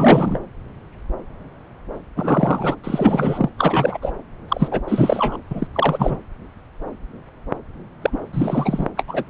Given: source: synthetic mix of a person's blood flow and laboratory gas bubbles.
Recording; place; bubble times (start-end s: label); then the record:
Doppler ultrasound of blood flow; subclavian vein
0.00-0.39 s: bubbles
2.16-2.75 s: bubbles
2.83-3.50 s: bubbles
3.58-3.97 s: bubbles
4.01-4.12 s: bubbles
4.48-4.68 s: bubbles
4.71-4.80 s: bubbles
4.88-5.37 s: bubbles
5.51-5.67 s: bubbles
5.72-6.17 s: bubbles
8.02-8.20 s: bubbles
8.33-8.88 s: bubbles
8.96-9.04 s: bubbles
9.07-9.24 s: bubbles
From the record:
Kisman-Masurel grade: 333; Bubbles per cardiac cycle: rolling drumbeat, 9 or more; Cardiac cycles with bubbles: 50 to 99%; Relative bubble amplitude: loud (0.450 to 0.775); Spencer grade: 3 (all of the cardiac periods contain showers or single bubble signals, but not dominating or overriding the cardiac motion signals); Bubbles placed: anywhere in the cardiac cycle